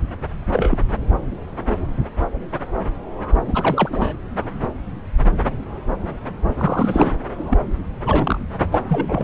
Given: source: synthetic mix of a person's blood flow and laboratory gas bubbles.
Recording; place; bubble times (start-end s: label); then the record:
Doppler ultrasound of blood flow; subclavian vein
0.52-0.78 s: bubbles
3.48-4.13 s: bubbles
6.58-7.12 s: bubbles
7.50-7.58 s: bubbles
8.04-8.38 s: bubbles
8.71-8.85 s: bubbles
8.87-9.24 s: bubbles
From the record:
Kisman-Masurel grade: 222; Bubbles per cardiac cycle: several, 3 to 8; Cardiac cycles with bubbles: 10 to 50%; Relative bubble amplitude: moderate (0.250 to 0.450); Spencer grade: 2 (many but less than half of the cardiac periods contain bubble signals, singularly or in groups); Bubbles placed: anywhere in the cardiac cycle